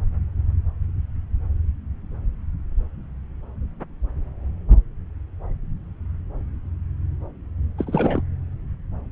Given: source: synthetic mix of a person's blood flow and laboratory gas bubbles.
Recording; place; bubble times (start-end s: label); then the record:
Doppler ultrasound of blood flow; subclavian vein
7.78-8.22 s: bubbles
From the record:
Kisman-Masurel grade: 212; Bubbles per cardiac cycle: several, 3 to 8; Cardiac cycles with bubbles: 1 to 10%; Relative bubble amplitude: moderate (0.250 to 0.450); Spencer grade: 1 (occasional bubble signal discernible with the cardiac motion signal, with majority of cardiac periods free of bubbles); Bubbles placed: anywhere in the cardiac cycle